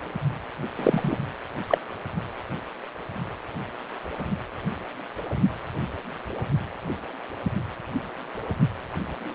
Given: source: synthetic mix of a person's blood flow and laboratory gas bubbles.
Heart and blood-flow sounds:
Doppler ultrasound of blood flow; precordium
0.76-1.18 s: bubbles
1.67-1.78 s: bubbles
From the record:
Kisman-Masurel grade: 122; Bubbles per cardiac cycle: 1 to 2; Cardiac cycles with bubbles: 10 to 50%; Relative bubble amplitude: moderate (0.250 to 0.450); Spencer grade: 2 (many but less than half of the cardiac periods contain bubble signals, singularly or in groups); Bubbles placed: anywhere in the cardiac cycle

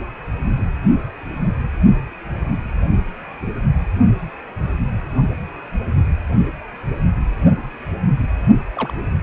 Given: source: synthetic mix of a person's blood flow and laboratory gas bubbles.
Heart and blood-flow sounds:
Doppler ultrasound of blood flow; precordium
8.75-8.94 s: bubbles
From the record:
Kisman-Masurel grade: 111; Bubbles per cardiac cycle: 1 to 2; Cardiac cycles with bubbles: 1 to 10%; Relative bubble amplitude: barely perceptible (0.100 to 0.250); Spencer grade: 1 (occasional bubble signal discernible with the cardiac motion signal, with majority of cardiac periods free of bubbles); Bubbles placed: only in the low amplitude regions of the cardiac cycle

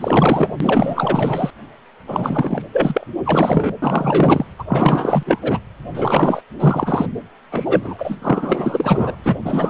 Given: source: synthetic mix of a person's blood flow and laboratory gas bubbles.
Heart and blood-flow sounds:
Doppler ultrasound of blood flow; precordium
0.01-0.51 s: bubbles
0.60-1.50 s: bubbles
2.07-2.62 s: bubbles
2.72-3.05 s: bubbles
3.25-3.71 s: bubbles
3.82-4.46 s: bubbles
4.58-4.64 s: bubbles
4.67-5.39 s: bubbles
5.42-5.59 s: bubbles
5.93-6.42 s: bubbles
6.60-7.06 s: bubbles
7.50-8.16 s: bubbles
8.22-9.15 s: bubbles
9.24-9.35 s: bubbles
9.44-9.70 s: bubbles
From the record:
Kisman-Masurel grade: 444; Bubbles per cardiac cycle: continuous sound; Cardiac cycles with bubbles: 100%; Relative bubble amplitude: maximal (0.775 to 0.999); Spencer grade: 4 (maximum detectable bubble signal sounding continuously throughout systole and diastole of every cardiac period, and overriding the amplitude of the normal cardiac signals); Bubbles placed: anywhere in the cardiac cycle

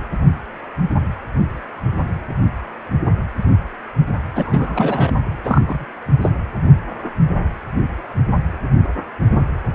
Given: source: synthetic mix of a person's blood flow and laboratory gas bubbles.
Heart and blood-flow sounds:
Doppler ultrasound of blood flow; precordium
4.35-5.12 s: bubbles
5.44-5.85 s: bubbles
6.22-6.30 s: bubbles
From the record:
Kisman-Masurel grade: 222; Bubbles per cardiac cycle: several, 3 to 8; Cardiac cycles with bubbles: 10 to 50%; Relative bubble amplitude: moderate (0.250 to 0.450); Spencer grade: 2 (many but less than half of the cardiac periods contain bubble signals, singularly or in groups); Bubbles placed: anywhere in the cardiac cycle

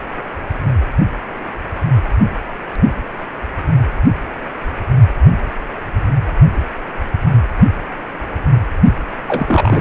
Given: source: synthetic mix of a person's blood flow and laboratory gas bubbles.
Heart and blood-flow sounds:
Doppler ultrasound of blood flow; precordium
9.28-9.81 s: bubbles
From the record:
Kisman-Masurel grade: 213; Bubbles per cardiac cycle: several, 3 to 8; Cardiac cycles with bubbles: 1 to 10%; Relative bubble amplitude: loud (0.450 to 0.775); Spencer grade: 1 (occasional bubble signal discernible with the cardiac motion signal, with majority of cardiac periods free of bubbles); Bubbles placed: anywhere in the cardiac cycle

